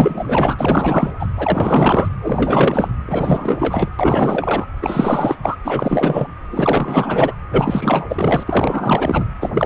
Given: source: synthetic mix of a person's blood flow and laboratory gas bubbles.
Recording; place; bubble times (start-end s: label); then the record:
Doppler ultrasound of blood flow; precordium
0.00-1.12 s: bubbles
1.19-1.26 s: bubbles
1.36-2.09 s: bubbles
2.22-2.90 s: bubbles
3.07-3.89 s: bubbles
3.99-4.67 s: bubbles
4.82-5.36 s: bubbles
5.42-5.56 s: bubbles
5.65-6.28 s: bubbles
6.50-7.34 s: bubbles
7.50-8.44 s: bubbles
8.47-9.28 s: bubbles
9.40-9.50 s: bubbles
9.54-9.66 s: bubbles
From the record:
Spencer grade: 4 (maximum detectable bubble signal sounding continuously throughout systole and diastole of every cardiac period, and overriding the amplitude of the normal cardiac signals); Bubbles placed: anywhere in the cardiac cycle